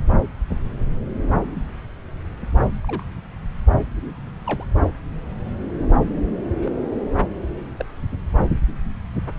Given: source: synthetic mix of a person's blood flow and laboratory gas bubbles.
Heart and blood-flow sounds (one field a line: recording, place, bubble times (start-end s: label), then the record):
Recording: Doppler ultrasound of blood flow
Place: subclavian vein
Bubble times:
2.83-3.04 s: bubbles
4.46-4.63 s: bubbles
6.62-6.71 s: bubbles
7.76-7.84 s: bubbles
From the record:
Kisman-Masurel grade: 121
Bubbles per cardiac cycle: 1 to 2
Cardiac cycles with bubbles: 10 to 50%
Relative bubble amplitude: barely perceptible (0.100 to 0.250)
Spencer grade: 2 (many but less than half of the cardiac periods contain bubble signals, singularly or in groups)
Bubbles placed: anywhere in the cardiac cycle